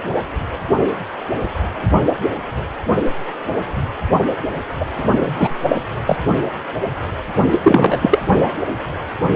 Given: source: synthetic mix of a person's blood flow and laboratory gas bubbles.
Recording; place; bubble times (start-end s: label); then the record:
Doppler ultrasound of blood flow; precordium
4.80-4.86 s: bubbles
4.95-5.34 s: bubbles
5.38-5.55 s: bubbles
5.68-5.82 s: bubbles
6.06-6.17 s: bubbles
7.51-7.98 s: bubbles
8.01-8.20 s: bubbles
8.29-8.35 s: bubbles
From the record:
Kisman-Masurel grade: 223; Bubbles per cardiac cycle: several, 3 to 8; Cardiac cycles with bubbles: 10 to 50%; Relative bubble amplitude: loud (0.450 to 0.775); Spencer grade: 2 (many but less than half of the cardiac periods contain bubble signals, singularly or in groups); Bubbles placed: only in the low amplitude regions of the cardiac cycle